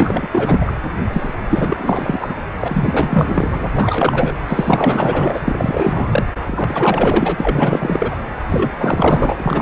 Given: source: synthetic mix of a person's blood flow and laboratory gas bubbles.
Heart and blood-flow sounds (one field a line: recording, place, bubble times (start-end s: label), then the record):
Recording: Doppler ultrasound of blood flow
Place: precordium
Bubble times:
0.00-0.28 s: bubbles
0.31-0.78 s: bubbles
1.12-1.33 s: bubbles
1.49-2.35 s: bubbles
2.59-3.71 s: bubbles
3.75-4.32 s: bubbles
4.47-6.25 s: bubbles
6.47-8.16 s: bubbles
8.49-8.72 s: bubbles
8.77-9.62 s: bubbles
From the record:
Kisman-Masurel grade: 444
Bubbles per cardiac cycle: continuous sound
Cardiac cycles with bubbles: 100%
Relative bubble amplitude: maximal (0.775 to 0.999)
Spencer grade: 4 (maximum detectable bubble signal sounding continuously throughout systole and diastole of every cardiac period, and overriding the amplitude of the normal cardiac signals)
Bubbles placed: anywhere in the cardiac cycle